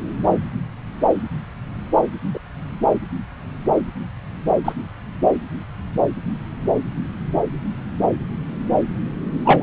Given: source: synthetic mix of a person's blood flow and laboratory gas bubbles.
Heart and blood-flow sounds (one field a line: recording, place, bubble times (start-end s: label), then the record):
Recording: Doppler ultrasound of blood flow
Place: subclavian vein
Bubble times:
2.33-2.40 s: bubbles
4.65-4.73 s: bubbles
9.45-9.63 s: bubbles
From the record:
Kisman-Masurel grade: 123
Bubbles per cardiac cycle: 1 to 2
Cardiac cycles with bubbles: 10 to 50%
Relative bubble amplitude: loud (0.450 to 0.775)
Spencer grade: 2 (many but less than half of the cardiac periods contain bubble signals, singularly or in groups)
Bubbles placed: anywhere in the cardiac cycle